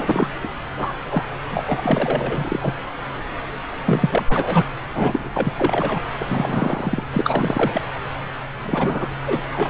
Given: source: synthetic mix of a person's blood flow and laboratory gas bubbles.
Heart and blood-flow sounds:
Doppler ultrasound of blood flow; subclavian vein
0.00-0.27 s: bubbles
0.43-0.48 s: bubbles
0.76-0.93 s: bubbles
1.09-1.24 s: bubbles
1.51-2.74 s: bubbles
3.86-4.25 s: bubbles
4.29-4.66 s: bubbles
4.93-5.30 s: bubbles
5.33-5.54 s: bubbles
5.58-6.00 s: bubbles
6.21-7.04 s: bubbles
7.12-7.81 s: bubbles
8.64-9.14 s: bubbles
9.26-9.41 s: bubbles
9.53-9.70 s: bubbles
From the record:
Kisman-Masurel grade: 333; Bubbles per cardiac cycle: rolling drumbeat, 9 or more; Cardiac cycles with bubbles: 50 to 99%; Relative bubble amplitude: loud (0.450 to 0.775); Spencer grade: 3 (all of the cardiac periods contain showers or single bubble signals, but not dominating or overriding the cardiac motion signals); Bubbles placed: anywhere in the cardiac cycle

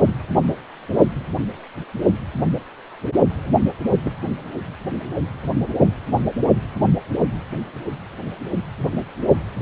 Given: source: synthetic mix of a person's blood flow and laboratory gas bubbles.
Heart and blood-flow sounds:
Doppler ultrasound of blood flow; precordium
4.04-4.13 s: bubbles
From the record:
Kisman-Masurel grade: 122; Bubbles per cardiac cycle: 1 to 2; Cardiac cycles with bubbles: 10 to 50%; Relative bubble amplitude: moderate (0.250 to 0.450); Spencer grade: 2 (many but less than half of the cardiac periods contain bubble signals, singularly or in groups); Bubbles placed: only in the low amplitude regions of the cardiac cycle

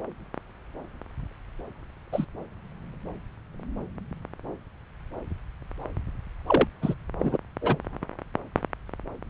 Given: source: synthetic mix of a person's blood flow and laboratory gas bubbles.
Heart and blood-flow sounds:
Doppler ultrasound of blood flow; subclavian vein
2.12-2.25 s: bubbles
6.46-6.67 s: bubbles
6.82-6.95 s: bubbles
7.19-7.38 s: bubbles
7.61-7.77 s: bubbles
From the record:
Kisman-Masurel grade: 122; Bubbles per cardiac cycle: 1 to 2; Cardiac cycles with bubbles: 10 to 50%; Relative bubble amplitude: moderate (0.250 to 0.450); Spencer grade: 2 (many but less than half of the cardiac periods contain bubble signals, singularly or in groups); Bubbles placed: anywhere in the cardiac cycle

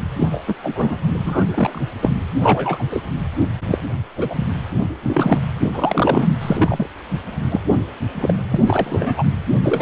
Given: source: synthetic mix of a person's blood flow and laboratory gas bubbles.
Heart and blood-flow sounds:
Doppler ultrasound of blood flow; precordium
0.20-0.43 s: bubbles
0.46-0.55 s: bubbles
0.62-0.97 s: bubbles
1.15-1.44 s: bubbles
1.50-1.81 s: bubbles
2.02-2.10 s: bubbles
2.42-2.84 s: bubbles
2.90-3.03 s: bubbles
3.67-3.78 s: bubbles
4.16-4.51 s: bubbles
5.03-5.41 s: bubbles
5.61-6.28 s: bubbles
6.41-6.88 s: bubbles
7.50-7.61 s: bubbles
8.20-8.34 s: bubbles
8.51-8.61 s: bubbles
8.67-9.24 s: bubbles
9.63-9.82 s: bubbles
From the record:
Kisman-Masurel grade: 243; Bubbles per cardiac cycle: several, 3 to 8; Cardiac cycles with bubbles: 100%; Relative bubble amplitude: loud (0.450 to 0.775); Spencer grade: 3 (all of the cardiac periods contain showers or single bubble signals, but not dominating or overriding the cardiac motion signals); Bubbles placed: anywhere in the cardiac cycle

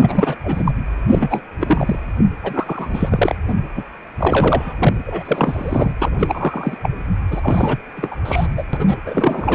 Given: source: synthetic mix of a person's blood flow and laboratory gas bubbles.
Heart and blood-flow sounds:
Doppler ultrasound of blood flow; precordium
0.00-0.35 s: bubbles
0.44-0.71 s: bubbles
1.09-1.40 s: bubbles
1.60-1.98 s: bubbles
2.17-2.25 s: bubbles
2.44-3.35 s: bubbles
3.48-3.54 s: bubbles
3.77-3.83 s: bubbles
4.17-4.74 s: bubbles
4.79-4.93 s: bubbles
5.07-5.23 s: bubbles
5.25-5.94 s: bubbles
6.01-6.10 s: bubbles
6.19-6.78 s: bubbles
6.83-6.90 s: bubbles
7.31-7.77 s: bubbles
7.96-8.16 s: bubbles
8.25-8.46 s: bubbles
8.57-8.63 s: bubbles
8.73-8.97 s: bubbles
9.05-9.55 s: bubbles
From the record:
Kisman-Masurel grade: 332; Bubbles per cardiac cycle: rolling drumbeat, 9 or more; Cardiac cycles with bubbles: 50 to 99%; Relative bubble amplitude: moderate (0.250 to 0.450); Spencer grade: 3 (all of the cardiac periods contain showers or single bubble signals, but not dominating or overriding the cardiac motion signals); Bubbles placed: anywhere in the cardiac cycle

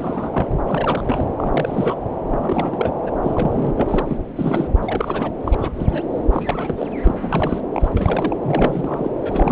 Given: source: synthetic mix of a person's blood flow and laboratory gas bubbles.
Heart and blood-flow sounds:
Doppler ultrasound of blood flow; subclavian vein
0.00-0.30 s: bubbles
0.33-0.46 s: bubbles
0.66-1.25 s: bubbles
1.36-1.95 s: bubbles
2.30-2.96 s: bubbles
3.03-3.11 s: bubbles
3.22-3.74 s: bubbles
3.77-4.17 s: bubbles
4.36-4.67 s: bubbles
4.82-5.31 s: bubbles
5.44-5.73 s: bubbles
5.76-6.02 s: bubbles
6.32-6.75 s: bubbles
6.78-6.87 s: bubbles
7.02-7.61 s: bubbles
7.74-7.90 s: bubbles
7.94-8.38 s: bubbles
8.42-9.11 s: bubbles
9.21-9.52 s: bubbles
From the record:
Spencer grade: 3 (all of the cardiac periods contain showers or single bubble signals, but not dominating or overriding the cardiac motion signals); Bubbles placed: anywhere in the cardiac cycle

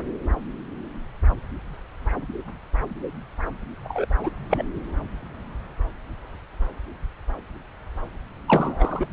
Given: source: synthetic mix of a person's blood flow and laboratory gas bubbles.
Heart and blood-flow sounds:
Doppler ultrasound of blood flow; subclavian vein
3.84-4.05 s: bubbles
4.18-4.30 s: bubbles
4.50-4.63 s: bubbles
8.48-9.07 s: bubbles
From the record:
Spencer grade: 2 (many but less than half of the cardiac periods contain bubble signals, singularly or in groups); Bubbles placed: anywhere in the cardiac cycle

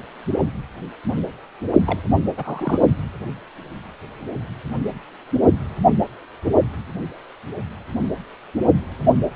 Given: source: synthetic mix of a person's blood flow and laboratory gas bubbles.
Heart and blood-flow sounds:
Doppler ultrasound of blood flow; precordium
1.85-2.00 s: bubbles
2.37-2.79 s: bubbles
From the record:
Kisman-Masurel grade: 211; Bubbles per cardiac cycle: several, 3 to 8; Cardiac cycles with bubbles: 1 to 10%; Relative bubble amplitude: barely perceptible (0.100 to 0.250); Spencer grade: 1 (occasional bubble signal discernible with the cardiac motion signal, with majority of cardiac periods free of bubbles); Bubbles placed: only in the low amplitude regions of the cardiac cycle

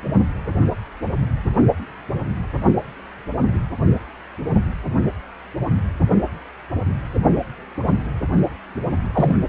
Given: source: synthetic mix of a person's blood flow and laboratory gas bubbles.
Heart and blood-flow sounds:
Doppler ultrasound of blood flow; precordium
9.12-9.37 s: bubbles
From the record:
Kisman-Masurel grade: 112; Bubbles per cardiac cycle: 1 to 2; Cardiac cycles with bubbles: 1 to 10%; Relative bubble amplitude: moderate (0.250 to 0.450); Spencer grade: 1 (occasional bubble signal discernible with the cardiac motion signal, with majority of cardiac periods free of bubbles); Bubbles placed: only in the low amplitude regions of the cardiac cycle

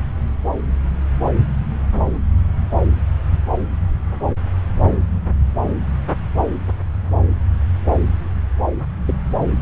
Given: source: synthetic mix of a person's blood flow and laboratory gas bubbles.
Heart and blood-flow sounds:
Doppler ultrasound of blood flow; subclavian vein
9.05-9.16 s: bubbles
From the record:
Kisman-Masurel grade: 112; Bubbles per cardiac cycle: 1 to 2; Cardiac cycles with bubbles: 1 to 10%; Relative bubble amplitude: moderate (0.250 to 0.450); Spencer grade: 1 (occasional bubble signal discernible with the cardiac motion signal, with majority of cardiac periods free of bubbles); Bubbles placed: anywhere in the cardiac cycle

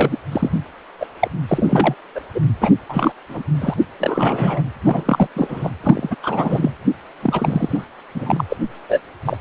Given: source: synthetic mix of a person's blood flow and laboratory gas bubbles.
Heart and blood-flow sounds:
Doppler ultrasound of blood flow; precordium
0.00-0.17 s: bubbles
0.32-0.51 s: bubbles
0.99-1.06 s: bubbles
1.20-1.28 s: bubbles
1.47-1.95 s: bubbles
2.15-2.20 s: bubbles
2.35-2.41 s: bubbles
2.60-2.70 s: bubbles
2.89-3.12 s: bubbles
3.29-3.43 s: bubbles
3.60-3.74 s: bubbles
3.99-4.61 s: bubbles
4.84-5.27 s: bubbles
5.34-5.70 s: bubbles
5.83-6.15 s: bubbles
6.22-6.71 s: bubbles
7.22-7.84 s: bubbles
8.15-8.45 s: bubbles
8.49-8.57 s: bubbles
8.88-9.00 s: bubbles
9.25-9.37 s: bubbles
From the record:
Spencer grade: 3 (all of the cardiac periods contain showers or single bubble signals, but not dominating or overriding the cardiac motion signals); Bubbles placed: anywhere in the cardiac cycle

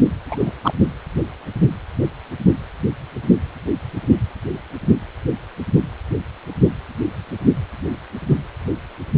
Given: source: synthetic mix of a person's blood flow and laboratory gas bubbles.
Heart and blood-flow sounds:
Doppler ultrasound of blood flow; precordium
0.28-0.36 s: bubbles
0.40-0.53 s: bubbles
0.63-0.74 s: bubbles
From the record:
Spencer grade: 1 (occasional bubble signal discernible with the cardiac motion signal, with majority of cardiac periods free of bubbles); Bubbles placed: anywhere in the cardiac cycle

